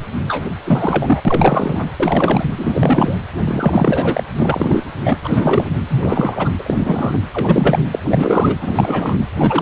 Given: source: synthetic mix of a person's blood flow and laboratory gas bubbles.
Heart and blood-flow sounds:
Doppler ultrasound of blood flow; precordium
0.28-0.45 s: bubbles
0.65-1.21 s: bubbles
1.25-1.89 s: bubbles
1.99-2.51 s: bubbles
2.58-3.17 s: bubbles
3.44-4.23 s: bubbles
4.38-4.86 s: bubbles
5.05-5.14 s: bubbles
5.23-5.69 s: bubbles
5.88-6.52 s: bubbles
6.59-7.19 s: bubbles
7.31-7.79 s: bubbles
7.91-7.99 s: bubbles
8.03-8.56 s: bubbles
8.60-9.19 s: bubbles
9.35-9.62 s: bubbles
From the record:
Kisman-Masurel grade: 333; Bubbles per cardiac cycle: rolling drumbeat, 9 or more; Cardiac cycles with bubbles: 50 to 99%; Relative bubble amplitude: loud (0.450 to 0.775); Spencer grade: 3 (all of the cardiac periods contain showers or single bubble signals, but not dominating or overriding the cardiac motion signals); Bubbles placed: anywhere in the cardiac cycle

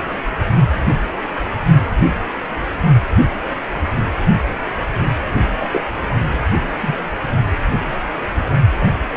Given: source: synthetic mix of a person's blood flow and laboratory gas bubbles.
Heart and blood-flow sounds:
Doppler ultrasound of blood flow; precordium
5.60-5.84 s: bubbles
6.77-6.95 s: bubbles
From the record:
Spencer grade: 2 (many but less than half of the cardiac periods contain bubble signals, singularly or in groups); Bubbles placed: only in the low amplitude regions of the cardiac cycle

